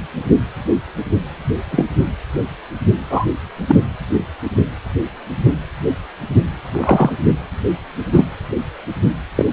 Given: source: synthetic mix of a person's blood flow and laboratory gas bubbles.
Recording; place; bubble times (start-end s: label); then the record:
Doppler ultrasound of blood flow; precordium
1.71-1.87 s: bubbles
3.10-3.25 s: bubbles
3.67-3.76 s: bubbles
6.73-7.12 s: bubbles
8.12-8.27 s: bubbles
9.37-9.45 s: bubbles
From the record:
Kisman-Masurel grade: 123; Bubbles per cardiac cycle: 1 to 2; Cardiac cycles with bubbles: 10 to 50%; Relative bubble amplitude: loud (0.450 to 0.775); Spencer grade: 2 (many but less than half of the cardiac periods contain bubble signals, singularly or in groups); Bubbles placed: anywhere in the cardiac cycle